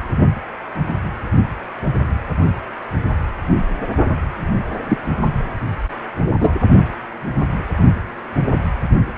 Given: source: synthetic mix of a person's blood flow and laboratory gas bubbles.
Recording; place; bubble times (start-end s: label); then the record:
Doppler ultrasound of blood flow; precordium
4.88-4.98 s: bubbles
6.40-6.55 s: bubbles
From the record:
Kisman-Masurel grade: 123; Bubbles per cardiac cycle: 1 to 2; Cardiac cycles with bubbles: 10 to 50%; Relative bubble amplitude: loud (0.450 to 0.775); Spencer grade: 2 (many but less than half of the cardiac periods contain bubble signals, singularly or in groups); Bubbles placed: anywhere in the cardiac cycle